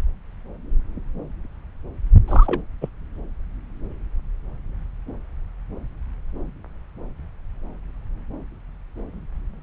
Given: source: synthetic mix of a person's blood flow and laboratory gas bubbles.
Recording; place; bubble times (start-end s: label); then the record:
Doppler ultrasound of blood flow; subclavian vein
2.28-2.60 s: bubbles
2.81-2.90 s: bubbles
From the record:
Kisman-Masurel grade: 212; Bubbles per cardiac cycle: several, 3 to 8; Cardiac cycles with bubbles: 1 to 10%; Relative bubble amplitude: moderate (0.250 to 0.450); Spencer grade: 1 (occasional bubble signal discernible with the cardiac motion signal, with majority of cardiac periods free of bubbles); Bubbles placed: anywhere in the cardiac cycle